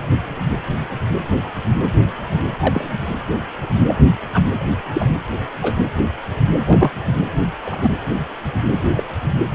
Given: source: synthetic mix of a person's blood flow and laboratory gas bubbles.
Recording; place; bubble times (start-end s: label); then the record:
Doppler ultrasound of blood flow; precordium
2.30-2.38 s: bubbles
2.61-2.85 s: bubbles
3.88-3.97 s: bubbles
4.33-4.42 s: bubbles
4.94-5.08 s: bubbles
5.62-5.75 s: bubbles
6.64-6.91 s: bubbles
7.62-7.91 s: bubbles
8.96-9.04 s: bubbles
From the record:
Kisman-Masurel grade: 123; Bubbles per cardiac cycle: 1 to 2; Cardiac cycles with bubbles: 10 to 50%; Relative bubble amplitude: loud (0.450 to 0.775); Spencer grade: 2 (many but less than half of the cardiac periods contain bubble signals, singularly or in groups); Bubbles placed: anywhere in the cardiac cycle